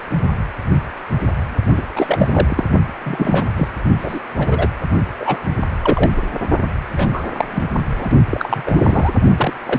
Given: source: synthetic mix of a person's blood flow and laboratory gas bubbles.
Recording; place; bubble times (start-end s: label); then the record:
Doppler ultrasound of blood flow; precordium
1.77-1.82 s: bubbles
1.96-2.65 s: bubbles
3.05-3.67 s: bubbles
3.99-4.19 s: bubbles
4.37-4.68 s: bubbles
5.20-5.38 s: bubbles
5.82-6.10 s: bubbles
6.17-6.21 s: bubbles
6.96-7.09 s: bubbles
7.13-7.22 s: bubbles
7.33-7.45 s: bubbles
7.51-7.63 s: bubbles
7.98-8.11 s: bubbles
8.30-9.12 s: bubbles
9.37-9.54 s: bubbles
9.65-9.79 s: bubbles
From the record:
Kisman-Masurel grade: 233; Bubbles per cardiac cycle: several, 3 to 8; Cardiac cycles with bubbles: 50 to 99%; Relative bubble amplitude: loud (0.450 to 0.775); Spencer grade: 3 (all of the cardiac periods contain showers or single bubble signals, but not dominating or overriding the cardiac motion signals); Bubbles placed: only in the low amplitude regions of the cardiac cycle